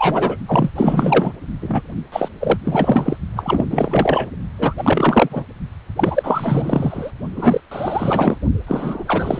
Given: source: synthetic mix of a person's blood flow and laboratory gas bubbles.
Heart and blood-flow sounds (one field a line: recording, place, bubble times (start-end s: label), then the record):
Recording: Doppler ultrasound of blood flow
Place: precordium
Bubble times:
0.00-0.37 s: bubbles
0.46-0.70 s: bubbles
0.75-1.33 s: bubbles
1.61-1.81 s: bubbles
2.12-2.29 s: bubbles
2.40-2.58 s: bubbles
2.64-3.17 s: bubbles
3.36-3.64 s: bubbles
3.70-4.30 s: bubbles
4.58-4.73 s: bubbles
4.77-5.43 s: bubbles
5.96-7.11 s: bubbles
7.35-7.61 s: bubbles
7.71-8.38 s: bubbles
8.67-9.39 s: bubbles
From the record:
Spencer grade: 4 (maximum detectable bubble signal sounding continuously throughout systole and diastole of every cardiac period, and overriding the amplitude of the normal cardiac signals)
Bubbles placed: only in the low amplitude regions of the cardiac cycle